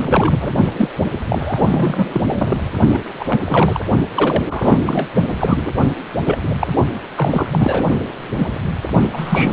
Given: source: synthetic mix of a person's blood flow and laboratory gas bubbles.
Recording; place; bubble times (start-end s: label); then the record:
Doppler ultrasound of blood flow; precordium
0.00-0.56 s: bubbles
0.78-0.89 s: bubbles
1.29-2.22 s: bubbles
2.25-2.58 s: bubbles
2.94-3.03 s: bubbles
3.19-3.41 s: bubbles
3.45-3.84 s: bubbles
4.15-4.44 s: bubbles
4.49-4.78 s: bubbles
4.86-5.08 s: bubbles
5.38-5.73 s: bubbles
6.25-6.38 s: bubbles
6.43-6.55 s: bubbles
6.59-6.67 s: bubbles
7.17-7.46 s: bubbles
7.52-7.82 s: bubbles
8.38-8.48 s: bubbles
8.92-9.08 s: bubbles
9.13-9.53 s: bubbles
From the record:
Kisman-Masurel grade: 342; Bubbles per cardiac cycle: rolling drumbeat, 9 or more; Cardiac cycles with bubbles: 100%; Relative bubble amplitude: moderate (0.250 to 0.450); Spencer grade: 3 (all of the cardiac periods contain showers or single bubble signals, but not dominating or overriding the cardiac motion signals); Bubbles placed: only in the low amplitude regions of the cardiac cycle